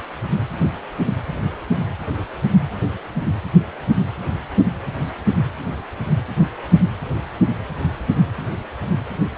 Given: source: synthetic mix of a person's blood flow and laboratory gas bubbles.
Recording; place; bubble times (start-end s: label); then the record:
Doppler ultrasound of blood flow; precordium
no bubbles
From the record:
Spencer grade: 0 (complete lack of bubble signals)